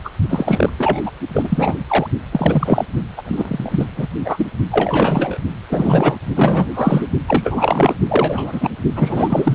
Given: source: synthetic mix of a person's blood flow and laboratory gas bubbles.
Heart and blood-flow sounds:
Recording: Doppler ultrasound of blood flow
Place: precordium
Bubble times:
0.04-0.09 s: bubbles
0.29-0.69 s: bubbles
0.78-1.01 s: bubbles
1.05-1.11 s: bubbles
1.33-1.84 s: bubbles
1.88-2.08 s: bubbles
2.32-2.85 s: bubbles
3.17-3.22 s: bubbles
3.25-3.85 s: bubbles
3.95-4.07 s: bubbles
4.24-4.47 s: bubbles
4.71-5.38 s: bubbles
5.69-6.20 s: bubbles
6.35-7.08 s: bubbles
7.27-7.95 s: bubbles
8.08-8.70 s: bubbles
8.96-9.55 s: bubbles
From the record:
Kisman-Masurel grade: 343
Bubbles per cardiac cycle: rolling drumbeat, 9 or more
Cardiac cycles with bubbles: 100%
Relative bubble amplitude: loud (0.450 to 0.775)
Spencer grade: 3 (all of the cardiac periods contain showers or single bubble signals, but not dominating or overriding the cardiac motion signals)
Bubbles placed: only in the low amplitude regions of the cardiac cycle

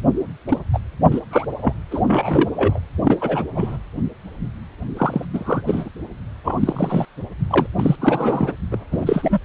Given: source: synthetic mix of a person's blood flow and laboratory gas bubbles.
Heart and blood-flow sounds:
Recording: Doppler ultrasound of blood flow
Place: precordium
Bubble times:
0.48-0.58 s: bubbles
0.72-0.79 s: bubbles
1.11-1.20 s: bubbles
1.31-1.45 s: bubbles
1.61-1.74 s: bubbles
1.91-2.00 s: bubbles
2.07-2.48 s: bubbles
2.55-2.79 s: bubbles
3.04-3.18 s: bubbles
3.21-3.45 s: bubbles
3.55-3.77 s: bubbles
4.96-5.25 s: bubbles
5.33-5.62 s: bubbles
5.67-5.89 s: bubbles
6.43-7.05 s: bubbles
7.49-7.67 s: bubbles
7.79-7.96 s: bubbles
8.01-8.53 s: bubbles
8.71-8.77 s: bubbles
8.91-9.39 s: bubbles
From the record:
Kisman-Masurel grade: 232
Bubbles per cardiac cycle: several, 3 to 8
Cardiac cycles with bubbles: 50 to 99%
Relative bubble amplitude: moderate (0.250 to 0.450)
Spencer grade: 3 (all of the cardiac periods contain showers or single bubble signals, but not dominating or overriding the cardiac motion signals)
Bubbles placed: anywhere in the cardiac cycle

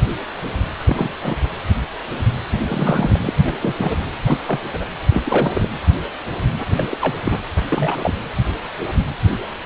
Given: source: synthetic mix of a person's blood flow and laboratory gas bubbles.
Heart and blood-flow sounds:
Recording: Doppler ultrasound of blood flow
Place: precordium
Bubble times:
0.86-1.12 s: bubbles
1.23-1.36 s: bubbles
2.68-3.33 s: bubbles
3.45-3.55 s: bubbles
3.62-3.97 s: bubbles
4.25-4.38 s: bubbles
4.46-4.59 s: bubbles
4.73-4.85 s: bubbles
5.08-5.67 s: bubbles
6.70-6.88 s: bubbles
6.91-6.98 s: bubbles
7.00-7.16 s: bubbles
7.25-7.40 s: bubbles
7.69-8.13 s: bubbles
From the record:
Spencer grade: 3 (all of the cardiac periods contain showers or single bubble signals, but not dominating or overriding the cardiac motion signals)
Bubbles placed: anywhere in the cardiac cycle

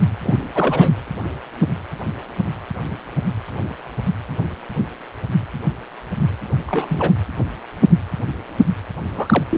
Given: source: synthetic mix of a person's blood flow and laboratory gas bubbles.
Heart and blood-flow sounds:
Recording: Doppler ultrasound of blood flow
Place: precordium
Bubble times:
0.23-0.48 s: bubbles
0.55-0.93 s: bubbles
6.67-7.12 s: bubbles
9.16-9.44 s: bubbles
9.50-9.58 s: bubbles
From the record:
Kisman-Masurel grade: 222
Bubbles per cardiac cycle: several, 3 to 8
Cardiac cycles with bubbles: 10 to 50%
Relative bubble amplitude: moderate (0.250 to 0.450)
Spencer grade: 2 (many but less than half of the cardiac periods contain bubble signals, singularly or in groups)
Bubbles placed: anywhere in the cardiac cycle

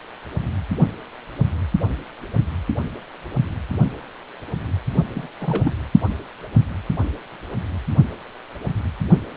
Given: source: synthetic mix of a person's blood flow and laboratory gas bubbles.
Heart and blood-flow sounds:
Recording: Doppler ultrasound of blood flow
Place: precordium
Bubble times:
5.14-5.28 s: bubbles
5.41-5.74 s: bubbles
From the record:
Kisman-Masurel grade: 211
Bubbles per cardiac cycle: several, 3 to 8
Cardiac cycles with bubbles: 1 to 10%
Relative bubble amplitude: barely perceptible (0.100 to 0.250)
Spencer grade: 1 (occasional bubble signal discernible with the cardiac motion signal, with majority of cardiac periods free of bubbles)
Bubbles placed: only in the low amplitude regions of the cardiac cycle

